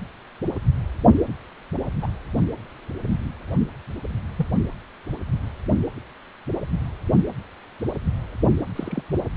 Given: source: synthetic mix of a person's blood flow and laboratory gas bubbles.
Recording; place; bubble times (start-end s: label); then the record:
Doppler ultrasound of blood flow; precordium
2.01-2.08 s: bubbles
4.37-4.46 s: bubbles
8.75-9.01 s: bubbles
From the record:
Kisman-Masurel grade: 121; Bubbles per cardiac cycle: 1 to 2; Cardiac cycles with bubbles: 10 to 50%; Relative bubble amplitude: barely perceptible (0.100 to 0.250); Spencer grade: 2 (many but less than half of the cardiac periods contain bubble signals, singularly or in groups); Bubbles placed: only in the low amplitude regions of the cardiac cycle